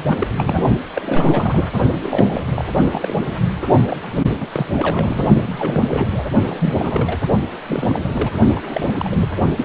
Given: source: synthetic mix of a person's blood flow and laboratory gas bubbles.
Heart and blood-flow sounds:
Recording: Doppler ultrasound of blood flow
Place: precordium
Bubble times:
0.00-0.28 s: bubbles
0.38-0.62 s: bubbles
0.95-1.68 s: bubbles
2.03-2.42 s: bubbles
2.55-2.64 s: bubbles
2.92-3.15 s: bubbles
3.67-3.71 s: bubbles
3.87-3.97 s: bubbles
4.03-4.07 s: bubbles
4.40-4.48 s: bubbles
4.52-4.67 s: bubbles
4.75-5.27 s: bubbles
5.43-6.27 s: bubbles
6.46-7.20 s: bubbles
7.68-8.37 s: bubbles
8.55-8.95 s: bubbles
8.98-9.29 s: bubbles
9.57-9.65 s: bubbles
From the record:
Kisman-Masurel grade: 342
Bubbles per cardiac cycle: rolling drumbeat, 9 or more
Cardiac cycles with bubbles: 100%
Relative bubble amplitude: moderate (0.250 to 0.450)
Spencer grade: 3 (all of the cardiac periods contain showers or single bubble signals, but not dominating or overriding the cardiac motion signals)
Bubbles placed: only in the low amplitude regions of the cardiac cycle

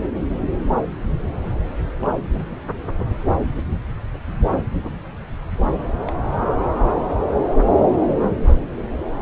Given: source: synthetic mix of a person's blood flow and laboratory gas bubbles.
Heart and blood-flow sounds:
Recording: Doppler ultrasound of blood flow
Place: subclavian vein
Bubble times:
1.99-2.47 s: bubbles
6.07-6.12 s: bubbles
8.19-8.63 s: bubbles
8.99-9.06 s: bubbles
From the record:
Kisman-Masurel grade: 121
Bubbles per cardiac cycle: 1 to 2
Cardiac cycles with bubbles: 10 to 50%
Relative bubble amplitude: barely perceptible (0.100 to 0.250)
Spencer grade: 2 (many but less than half of the cardiac periods contain bubble signals, singularly or in groups)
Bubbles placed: anywhere in the cardiac cycle

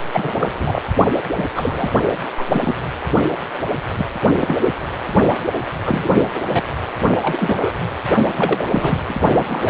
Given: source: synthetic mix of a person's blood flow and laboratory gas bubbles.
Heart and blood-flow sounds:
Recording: Doppler ultrasound of blood flow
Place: precordium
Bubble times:
0.12-0.34 s: bubbles
0.40-0.48 s: bubbles
0.58-0.80 s: bubbles
1.36-1.44 s: bubbles
1.56-1.91 s: bubbles
2.37-2.44 s: bubbles
2.51-2.75 s: bubbles
3.98-4.05 s: bubbles
4.36-4.56 s: bubbles
4.61-4.71 s: bubbles
5.85-6.09 s: bubbles
6.14-6.25 s: bubbles
6.35-6.42 s: bubbles
6.47-6.62 s: bubbles
7.19-7.72 s: bubbles
8.37-8.64 s: bubbles
8.71-8.99 s: bubbles
9.08-9.13 s: bubbles
9.33-9.70 s: bubbles
From the record:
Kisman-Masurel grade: 242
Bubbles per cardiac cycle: several, 3 to 8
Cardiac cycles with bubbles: 100%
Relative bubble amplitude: moderate (0.250 to 0.450)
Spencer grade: 3 (all of the cardiac periods contain showers or single bubble signals, but not dominating or overriding the cardiac motion signals)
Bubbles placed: only in the low amplitude regions of the cardiac cycle

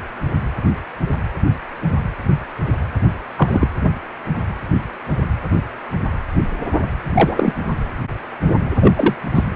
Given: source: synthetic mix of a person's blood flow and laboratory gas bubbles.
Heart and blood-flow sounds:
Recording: Doppler ultrasound of blood flow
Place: precordium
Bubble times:
3.37-3.68 s: bubbles
7.14-7.55 s: bubbles
8.80-8.92 s: bubbles
8.96-9.15 s: bubbles
9.34-9.45 s: bubbles
From the record:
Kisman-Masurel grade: 223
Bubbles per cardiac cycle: several, 3 to 8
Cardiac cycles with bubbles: 10 to 50%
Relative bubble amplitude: loud (0.450 to 0.775)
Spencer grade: 2 (many but less than half of the cardiac periods contain bubble signals, singularly or in groups)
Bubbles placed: anywhere in the cardiac cycle

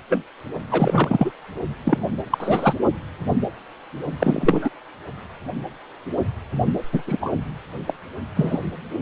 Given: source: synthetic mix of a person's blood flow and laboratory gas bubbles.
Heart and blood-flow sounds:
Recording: Doppler ultrasound of blood flow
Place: precordium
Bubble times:
0.10-0.23 s: bubbles
0.71-1.30 s: bubbles
1.85-2.07 s: bubbles
2.30-2.73 s: bubbles
4.20-4.70 s: bubbles
6.92-7.02 s: bubbles
7.07-7.17 s: bubbles
7.21-7.33 s: bubbles
7.87-7.93 s: bubbles
8.36-8.59 s: bubbles
From the record:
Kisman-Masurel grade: 232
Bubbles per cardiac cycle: several, 3 to 8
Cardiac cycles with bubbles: 50 to 99%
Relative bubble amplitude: moderate (0.250 to 0.450)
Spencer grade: 3 (all of the cardiac periods contain showers or single bubble signals, but not dominating or overriding the cardiac motion signals)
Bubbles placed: only in the low amplitude regions of the cardiac cycle

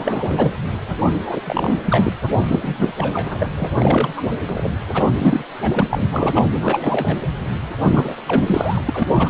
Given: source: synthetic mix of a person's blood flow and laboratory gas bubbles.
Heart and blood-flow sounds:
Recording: Doppler ultrasound of blood flow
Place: precordium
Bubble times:
0.00-0.53 s: bubbles
1.06-1.13 s: bubbles
1.25-1.41 s: bubbles
1.44-2.12 s: bubbles
2.41-2.74 s: bubbles
2.79-2.92 s: bubbles
2.97-3.48 s: bubbles
3.56-3.70 s: bubbles
3.79-4.13 s: bubbles
4.17-4.22 s: bubbles
4.46-4.69 s: bubbles
4.94-5.06 s: bubbles
5.14-5.44 s: bubbles
5.62-5.86 s: bubbles
5.90-6.07 s: bubbles
6.11-6.42 s: bubbles
6.61-7.17 s: bubbles
7.84-8.16 s: bubbles
8.27-8.81 s: bubbles
8.88-9.07 s: bubbles
9.15-9.29 s: bubbles
From the record:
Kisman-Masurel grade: 343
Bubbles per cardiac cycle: rolling drumbeat, 9 or more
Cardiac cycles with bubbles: 100%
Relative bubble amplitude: loud (0.450 to 0.775)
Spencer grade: 3 (all of the cardiac periods contain showers or single bubble signals, but not dominating or overriding the cardiac motion signals)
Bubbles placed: anywhere in the cardiac cycle

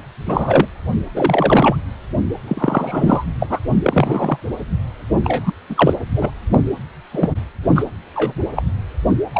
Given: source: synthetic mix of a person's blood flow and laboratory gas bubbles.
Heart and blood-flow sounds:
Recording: Doppler ultrasound of blood flow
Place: precordium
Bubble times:
0.27-0.67 s: bubbles
1.14-1.76 s: bubbles
2.48-3.25 s: bubbles
3.40-3.60 s: bubbles
3.83-4.40 s: bubbles
5.24-5.52 s: bubbles
5.69-5.94 s: bubbles
6.15-6.30 s: bubbles
6.52-6.59 s: bubbles
7.11-7.29 s: bubbles
7.75-7.83 s: bubbles
8.15-8.33 s: bubbles
8.55-8.63 s: bubbles
9.33-9.40 s: bubbles
From the record:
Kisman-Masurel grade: 243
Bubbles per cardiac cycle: several, 3 to 8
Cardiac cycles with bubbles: 100%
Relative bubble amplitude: loud (0.450 to 0.775)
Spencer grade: 3 (all of the cardiac periods contain showers or single bubble signals, but not dominating or overriding the cardiac motion signals)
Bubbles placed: anywhere in the cardiac cycle

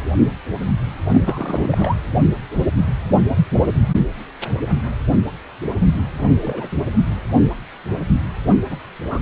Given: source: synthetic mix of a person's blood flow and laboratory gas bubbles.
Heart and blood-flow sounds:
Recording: Doppler ultrasound of blood flow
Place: precordium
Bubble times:
1.13-1.19 s: bubbles
1.21-1.95 s: bubbles
6.19-6.37 s: bubbles
6.40-6.71 s: bubbles
8.70-8.76 s: bubbles
9.04-9.22 s: bubbles
From the record:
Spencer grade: 2 (many but less than half of the cardiac periods contain bubble signals, singularly or in groups)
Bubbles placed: anywhere in the cardiac cycle

